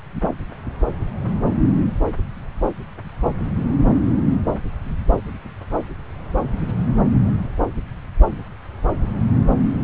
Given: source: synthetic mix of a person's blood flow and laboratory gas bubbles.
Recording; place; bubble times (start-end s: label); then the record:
Doppler ultrasound of blood flow; subclavian vein
no bubbles
From the record:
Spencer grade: 0 (complete lack of bubble signals)